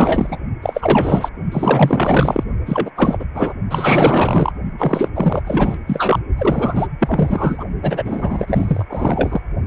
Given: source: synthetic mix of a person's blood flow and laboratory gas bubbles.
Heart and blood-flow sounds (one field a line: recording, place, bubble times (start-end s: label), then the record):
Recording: Doppler ultrasound of blood flow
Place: precordium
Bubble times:
0.00-0.39 s: bubbles
0.62-1.29 s: bubbles
1.52-2.44 s: bubbles
2.65-2.91 s: bubbles
2.96-3.25 s: bubbles
3.34-3.54 s: bubbles
3.70-4.52 s: bubbles
4.78-5.11 s: bubbles
5.15-5.42 s: bubbles
5.44-5.81 s: bubbles
5.87-6.19 s: bubbles
6.38-6.88 s: bubbles
6.99-7.64 s: bubbles
7.82-8.84 s: bubbles
8.89-9.40 s: bubbles
From the record:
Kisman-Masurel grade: 444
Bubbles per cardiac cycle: continuous sound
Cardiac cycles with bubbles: 100%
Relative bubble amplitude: maximal (0.775 to 0.999)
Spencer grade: 4 (maximum detectable bubble signal sounding continuously throughout systole and diastole of every cardiac period, and overriding the amplitude of the normal cardiac signals)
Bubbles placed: only in the low amplitude regions of the cardiac cycle